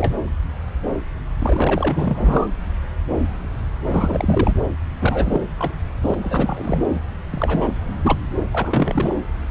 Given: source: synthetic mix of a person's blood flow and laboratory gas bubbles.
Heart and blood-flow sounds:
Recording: Doppler ultrasound of blood flow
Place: subclavian vein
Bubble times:
0.00-0.14 s: bubbles
1.39-2.47 s: bubbles
3.85-4.55 s: bubbles
4.99-5.41 s: bubbles
5.58-5.74 s: bubbles
6.02-6.15 s: bubbles
6.22-6.83 s: bubbles
6.89-6.99 s: bubbles
7.31-7.73 s: bubbles
8.02-8.17 s: bubbles
8.51-9.14 s: bubbles
From the record:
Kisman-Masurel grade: 332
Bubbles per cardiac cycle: rolling drumbeat, 9 or more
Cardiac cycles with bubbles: 50 to 99%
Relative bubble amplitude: moderate (0.250 to 0.450)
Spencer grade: 3 (all of the cardiac periods contain showers or single bubble signals, but not dominating or overriding the cardiac motion signals)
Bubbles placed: anywhere in the cardiac cycle

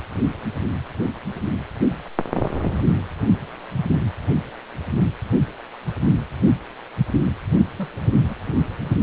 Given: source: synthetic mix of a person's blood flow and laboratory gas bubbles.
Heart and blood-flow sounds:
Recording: Doppler ultrasound of blood flow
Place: precordium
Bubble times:
7.54-7.62 s: bubbles
7.78-7.89 s: bubbles
8.29-8.34 s: bubbles
From the record:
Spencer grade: 1 (occasional bubble signal discernible with the cardiac motion signal, with majority of cardiac periods free of bubbles)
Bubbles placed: anywhere in the cardiac cycle

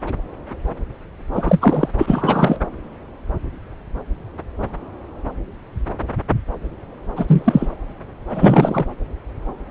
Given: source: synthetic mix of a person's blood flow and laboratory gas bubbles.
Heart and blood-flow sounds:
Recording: Doppler ultrasound of blood flow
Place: subclavian vein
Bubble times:
1.32-1.89 s: bubbles
1.98-2.58 s: bubbles
7.15-7.68 s: bubbles
8.29-8.86 s: bubbles
From the record:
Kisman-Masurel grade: 223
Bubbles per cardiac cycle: several, 3 to 8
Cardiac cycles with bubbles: 10 to 50%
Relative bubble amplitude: loud (0.450 to 0.775)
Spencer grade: 2 (many but less than half of the cardiac periods contain bubble signals, singularly or in groups)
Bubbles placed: anywhere in the cardiac cycle

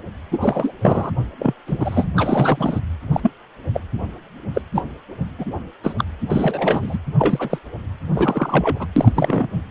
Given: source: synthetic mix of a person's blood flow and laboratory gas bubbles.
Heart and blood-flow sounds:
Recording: Doppler ultrasound of blood flow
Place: precordium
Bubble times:
0.31-0.73 s: bubbles
0.81-1.11 s: bubbles
1.39-1.54 s: bubbles
1.67-2.07 s: bubbles
2.16-2.79 s: bubbles
3.12-3.31 s: bubbles
3.73-3.80 s: bubbles
4.54-4.62 s: bubbles
4.75-4.83 s: bubbles
5.39-5.45 s: bubbles
5.83-5.94 s: bubbles
5.98-6.05 s: bubbles
6.29-6.98 s: bubbles
7.18-7.58 s: bubbles
8.12-8.88 s: bubbles
8.96-9.47 s: bubbles
9.54-9.61 s: bubbles
From the record:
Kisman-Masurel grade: 243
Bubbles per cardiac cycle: several, 3 to 8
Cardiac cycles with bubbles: 100%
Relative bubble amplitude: loud (0.450 to 0.775)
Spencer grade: 3 (all of the cardiac periods contain showers or single bubble signals, but not dominating or overriding the cardiac motion signals)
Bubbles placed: anywhere in the cardiac cycle

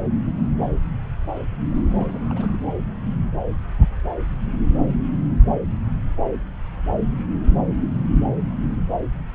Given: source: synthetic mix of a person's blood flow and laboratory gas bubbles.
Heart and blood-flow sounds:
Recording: Doppler ultrasound of blood flow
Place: subclavian vein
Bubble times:
1.69-2.58 s: bubbles
From the record:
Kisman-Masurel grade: 211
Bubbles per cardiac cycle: several, 3 to 8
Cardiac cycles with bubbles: 1 to 10%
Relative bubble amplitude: barely perceptible (0.100 to 0.250)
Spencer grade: 1 (occasional bubble signal discernible with the cardiac motion signal, with majority of cardiac periods free of bubbles)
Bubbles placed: anywhere in the cardiac cycle

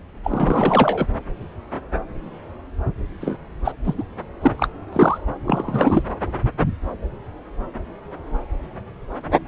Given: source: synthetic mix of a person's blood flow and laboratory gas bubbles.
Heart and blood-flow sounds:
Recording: Doppler ultrasound of blood flow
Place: subclavian vein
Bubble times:
0.23-1.06 s: bubbles
3.21-3.36 s: bubbles
3.64-3.73 s: bubbles
3.84-3.94 s: bubbles
3.97-4.04 s: bubbles
4.42-4.51 s: bubbles
4.57-4.68 s: bubbles
4.92-5.18 s: bubbles
5.45-6.06 s: bubbles
From the record:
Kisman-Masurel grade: 223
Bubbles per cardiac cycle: several, 3 to 8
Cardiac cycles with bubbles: 10 to 50%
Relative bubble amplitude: loud (0.450 to 0.775)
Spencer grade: 2 (many but less than half of the cardiac periods contain bubble signals, singularly or in groups)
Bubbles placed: anywhere in the cardiac cycle

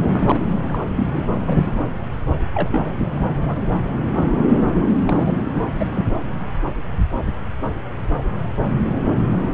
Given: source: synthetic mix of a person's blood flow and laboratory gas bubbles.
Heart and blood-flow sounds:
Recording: Doppler ultrasound of blood flow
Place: subclavian vein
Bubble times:
0.00-0.45 s: bubbles
0.68-0.80 s: bubbles
0.96-1.23 s: bubbles
1.46-1.80 s: bubbles
2.54-2.69 s: bubbles
2.71-2.94 s: bubbles
2.97-3.28 s: bubbles
3.47-3.55 s: bubbles
5.06-5.38 s: bubbles
5.45-5.61 s: bubbles
5.79-5.85 s: bubbles
5.95-6.07 s: bubbles
From the record:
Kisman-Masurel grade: 232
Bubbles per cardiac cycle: several, 3 to 8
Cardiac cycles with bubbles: 50 to 99%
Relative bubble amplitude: moderate (0.250 to 0.450)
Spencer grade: 3 (all of the cardiac periods contain showers or single bubble signals, but not dominating or overriding the cardiac motion signals)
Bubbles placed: anywhere in the cardiac cycle

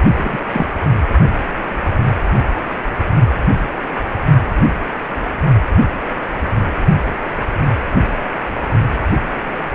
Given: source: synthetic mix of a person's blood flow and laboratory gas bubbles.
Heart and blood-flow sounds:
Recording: Doppler ultrasound of blood flow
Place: precordium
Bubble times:
0.17-0.39 s: bubbles
0.53-0.67 s: bubbles
From the record:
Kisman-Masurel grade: 112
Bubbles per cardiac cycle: 1 to 2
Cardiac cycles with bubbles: 1 to 10%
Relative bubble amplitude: moderate (0.250 to 0.450)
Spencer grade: 1 (occasional bubble signal discernible with the cardiac motion signal, with majority of cardiac periods free of bubbles)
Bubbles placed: only in the low amplitude regions of the cardiac cycle

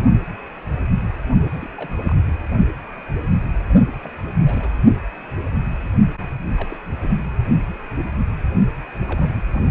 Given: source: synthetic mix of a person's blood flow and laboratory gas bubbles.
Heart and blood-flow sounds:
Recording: Doppler ultrasound of blood flow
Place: precordium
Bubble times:
1.54-1.69 s: bubbles
1.77-1.90 s: bubbles
2.02-2.16 s: bubbles
2.27-2.31 s: bubbles
4.00-4.11 s: bubbles
4.46-4.70 s: bubbles
6.54-6.77 s: bubbles
6.96-7.14 s: bubbles
7.17-7.28 s: bubbles
9.07-9.39 s: bubbles
9.52-9.71 s: bubbles
From the record:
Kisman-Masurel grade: 221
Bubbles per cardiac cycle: several, 3 to 8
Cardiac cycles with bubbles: 10 to 50%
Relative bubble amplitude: barely perceptible (0.100 to 0.250)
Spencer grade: 2 (many but less than half of the cardiac periods contain bubble signals, singularly or in groups)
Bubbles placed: only in the low amplitude regions of the cardiac cycle

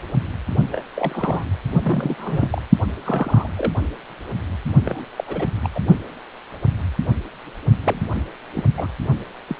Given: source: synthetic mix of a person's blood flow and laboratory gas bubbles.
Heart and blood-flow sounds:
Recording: Doppler ultrasound of blood flow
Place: precordium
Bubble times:
0.72-0.82 s: bubbles
0.95-1.44 s: bubbles
1.82-2.15 s: bubbles
2.17-2.61 s: bubbles
3.04-3.50 s: bubbles
3.57-3.72 s: bubbles
4.85-5.05 s: bubbles
5.18-5.47 s: bubbles
5.63-5.68 s: bubbles
5.75-5.80 s: bubbles
7.85-8.02 s: bubbles
8.54-8.64 s: bubbles
8.77-8.88 s: bubbles
9.48-9.56 s: bubbles
From the record:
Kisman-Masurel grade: 232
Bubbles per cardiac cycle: several, 3 to 8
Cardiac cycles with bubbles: 50 to 99%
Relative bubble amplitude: moderate (0.250 to 0.450)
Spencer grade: 3 (all of the cardiac periods contain showers or single bubble signals, but not dominating or overriding the cardiac motion signals)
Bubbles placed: only in the low amplitude regions of the cardiac cycle

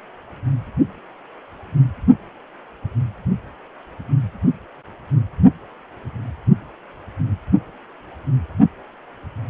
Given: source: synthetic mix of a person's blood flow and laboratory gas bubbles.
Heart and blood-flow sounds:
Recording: Doppler ultrasound of blood flow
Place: precordium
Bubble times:
no bubbles
From the record:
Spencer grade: 0 (complete lack of bubble signals)

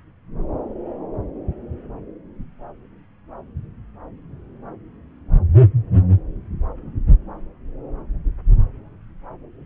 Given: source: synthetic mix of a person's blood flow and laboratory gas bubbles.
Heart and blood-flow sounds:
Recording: Doppler ultrasound of blood flow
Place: subclavian vein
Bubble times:
no bubbles
From the record:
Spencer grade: 0 (complete lack of bubble signals)

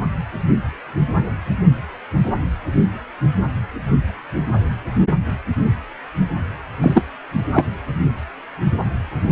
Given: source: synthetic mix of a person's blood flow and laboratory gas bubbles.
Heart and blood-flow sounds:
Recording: Doppler ultrasound of blood flow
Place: precordium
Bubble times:
6.81-7.04 s: bubbles
7.53-7.66 s: bubbles
From the record:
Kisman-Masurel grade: 223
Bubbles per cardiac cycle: several, 3 to 8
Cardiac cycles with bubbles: 10 to 50%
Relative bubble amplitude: loud (0.450 to 0.775)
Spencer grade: 2 (many but less than half of the cardiac periods contain bubble signals, singularly or in groups)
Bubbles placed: anywhere in the cardiac cycle

